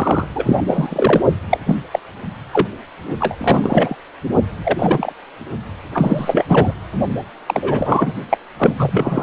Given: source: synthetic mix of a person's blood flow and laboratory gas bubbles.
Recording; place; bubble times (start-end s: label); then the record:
Doppler ultrasound of blood flow; precordium
0.00-0.29 s: bubbles
0.35-0.62 s: bubbles
0.67-1.21 s: bubbles
1.50-1.58 s: bubbles
1.66-1.76 s: bubbles
1.91-1.99 s: bubbles
2.52-2.68 s: bubbles
3.20-3.35 s: bubbles
3.38-3.96 s: bubbles
4.64-5.12 s: bubbles
5.93-6.45 s: bubbles
6.48-6.73 s: bubbles
7.47-8.13 s: bubbles
8.30-8.38 s: bubbles
8.58-9.23 s: bubbles
From the record:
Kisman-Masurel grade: 233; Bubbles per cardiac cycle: several, 3 to 8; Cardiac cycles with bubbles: 50 to 99%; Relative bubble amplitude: loud (0.450 to 0.775); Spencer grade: 3 (all of the cardiac periods contain showers or single bubble signals, but not dominating or overriding the cardiac motion signals); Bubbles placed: only in the low amplitude regions of the cardiac cycle